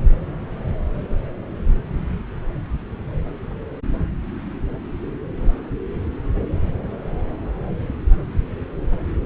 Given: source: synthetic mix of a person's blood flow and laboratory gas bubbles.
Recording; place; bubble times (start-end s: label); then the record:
Doppler ultrasound of blood flow; subclavian vein
no bubbles
From the record:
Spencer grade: 0 (complete lack of bubble signals)